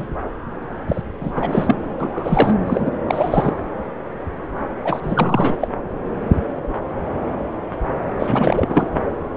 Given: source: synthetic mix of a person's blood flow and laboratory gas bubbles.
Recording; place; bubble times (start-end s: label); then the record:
Doppler ultrasound of blood flow; subclavian vein
0.00-0.07 s: bubbles
0.88-1.01 s: bubbles
1.20-1.33 s: bubbles
1.35-1.76 s: bubbles
2.00-2.56 s: bubbles
2.66-2.91 s: bubbles
3.08-3.56 s: bubbles
4.84-5.53 s: bubbles
5.60-5.67 s: bubbles
8.19-8.87 s: bubbles
From the record:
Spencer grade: 3 (all of the cardiac periods contain showers or single bubble signals, but not dominating or overriding the cardiac motion signals); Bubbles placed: anywhere in the cardiac cycle